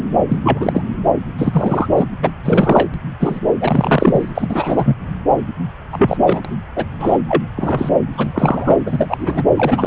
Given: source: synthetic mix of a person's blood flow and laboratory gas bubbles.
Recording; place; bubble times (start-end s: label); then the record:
Doppler ultrasound of blood flow; subclavian vein
0.28-0.38 s: bubbles
0.43-0.84 s: bubbles
1.38-1.88 s: bubbles
1.96-2.05 s: bubbles
2.23-2.33 s: bubbles
2.43-2.88 s: bubbles
2.94-2.98 s: bubbles
3.20-3.40 s: bubbles
3.60-4.32 s: bubbles
4.34-4.95 s: bubbles
5.92-6.17 s: bubbles
6.25-6.42 s: bubbles
6.45-6.55 s: bubbles
6.76-6.85 s: bubbles
7.00-7.17 s: bubbles
7.28-7.43 s: bubbles
7.56-7.89 s: bubbles
8.13-8.77 s: bubbles
8.86-9.44 s: bubbles
9.56-9.87 s: bubbles
From the record:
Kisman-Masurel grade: 243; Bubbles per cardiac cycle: several, 3 to 8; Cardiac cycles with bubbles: 100%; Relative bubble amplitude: loud (0.450 to 0.775); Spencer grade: 3 (all of the cardiac periods contain showers or single bubble signals, but not dominating or overriding the cardiac motion signals); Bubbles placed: anywhere in the cardiac cycle